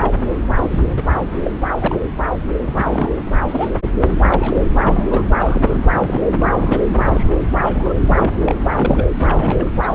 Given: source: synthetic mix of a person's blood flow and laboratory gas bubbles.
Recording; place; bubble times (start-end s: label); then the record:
Doppler ultrasound of blood flow; subclavian vein
0.00-0.14 s: bubbles
0.55-0.82 s: bubbles
0.96-1.02 s: bubbles
1.12-1.52 s: bubbles
1.75-1.99 s: bubbles
2.36-2.41 s: bubbles
2.73-3.12 s: bubbles
3.49-3.76 s: bubbles
4.11-4.65 s: bubbles
4.82-5.27 s: bubbles
5.38-5.83 s: bubbles
5.96-6.21 s: bubbles
6.35-6.85 s: bubbles
6.98-7.38 s: bubbles
7.51-7.93 s: bubbles
8.09-8.31 s: bubbles
8.42-8.56 s: bubbles
8.66-9.07 s: bubbles
9.19-9.70 s: bubbles
9.76-9.95 s: bubbles
From the record:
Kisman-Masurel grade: 242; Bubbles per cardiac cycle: several, 3 to 8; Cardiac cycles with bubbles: 100%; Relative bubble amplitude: moderate (0.250 to 0.450); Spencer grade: 3 (all of the cardiac periods contain showers or single bubble signals, but not dominating or overriding the cardiac motion signals); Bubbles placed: anywhere in the cardiac cycle